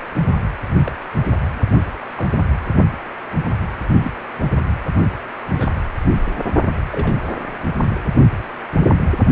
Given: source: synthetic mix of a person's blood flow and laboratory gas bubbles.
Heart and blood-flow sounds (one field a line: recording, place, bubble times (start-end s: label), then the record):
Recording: Doppler ultrasound of blood flow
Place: precordium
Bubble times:
0.85-0.92 s: bubbles
2.17-2.27 s: bubbles
4.00-4.10 s: bubbles
5.53-5.74 s: bubbles
6.76-6.81 s: bubbles
6.92-7.15 s: bubbles
From the record:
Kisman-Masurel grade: 121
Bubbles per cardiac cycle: 1 to 2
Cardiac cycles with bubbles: 10 to 50%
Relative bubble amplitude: barely perceptible (0.100 to 0.250)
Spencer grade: 2 (many but less than half of the cardiac periods contain bubble signals, singularly or in groups)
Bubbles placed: only in the low amplitude regions of the cardiac cycle